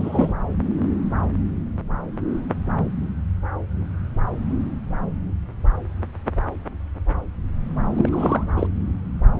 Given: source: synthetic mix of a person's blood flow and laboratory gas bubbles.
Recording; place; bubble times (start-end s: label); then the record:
Doppler ultrasound of blood flow; subclavian vein
0.00-0.33 s: bubbles
7.94-8.09 s: bubbles
8.12-8.46 s: bubbles
8.56-8.67 s: bubbles
From the record:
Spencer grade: 2 (many but less than half of the cardiac periods contain bubble signals, singularly or in groups); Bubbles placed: anywhere in the cardiac cycle